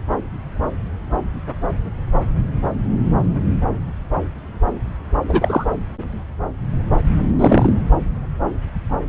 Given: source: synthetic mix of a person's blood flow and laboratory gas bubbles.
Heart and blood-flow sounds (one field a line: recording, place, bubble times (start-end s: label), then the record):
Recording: Doppler ultrasound of blood flow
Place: subclavian vein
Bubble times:
5.29-5.65 s: bubbles
7.39-7.72 s: bubbles
From the record:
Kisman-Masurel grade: 213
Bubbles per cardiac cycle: several, 3 to 8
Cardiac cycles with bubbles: 1 to 10%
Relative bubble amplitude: loud (0.450 to 0.775)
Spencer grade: 1 (occasional bubble signal discernible with the cardiac motion signal, with majority of cardiac periods free of bubbles)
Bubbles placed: anywhere in the cardiac cycle